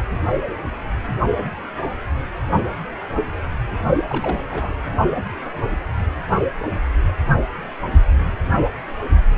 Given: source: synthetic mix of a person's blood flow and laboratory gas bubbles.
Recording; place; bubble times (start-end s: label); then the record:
Doppler ultrasound of blood flow; precordium
4.09-4.42 s: bubbles
4.49-4.75 s: bubbles
From the record:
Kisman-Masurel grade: 211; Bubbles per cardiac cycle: several, 3 to 8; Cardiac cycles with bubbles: 1 to 10%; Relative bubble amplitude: barely perceptible (0.100 to 0.250); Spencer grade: 1 (occasional bubble signal discernible with the cardiac motion signal, with majority of cardiac periods free of bubbles); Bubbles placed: only in the low amplitude regions of the cardiac cycle